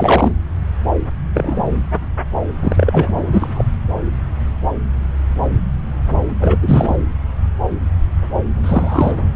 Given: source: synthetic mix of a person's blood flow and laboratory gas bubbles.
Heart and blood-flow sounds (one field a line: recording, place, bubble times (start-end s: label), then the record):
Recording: Doppler ultrasound of blood flow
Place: subclavian vein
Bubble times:
0.00-0.33 s: bubbles
1.33-1.63 s: bubbles
2.61-3.63 s: bubbles
6.14-6.58 s: bubbles
6.62-6.96 s: bubbles
8.63-9.12 s: bubbles
From the record:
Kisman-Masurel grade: 223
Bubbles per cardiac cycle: several, 3 to 8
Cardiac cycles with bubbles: 10 to 50%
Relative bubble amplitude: loud (0.450 to 0.775)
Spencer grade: 2 (many but less than half of the cardiac periods contain bubble signals, singularly or in groups)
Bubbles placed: anywhere in the cardiac cycle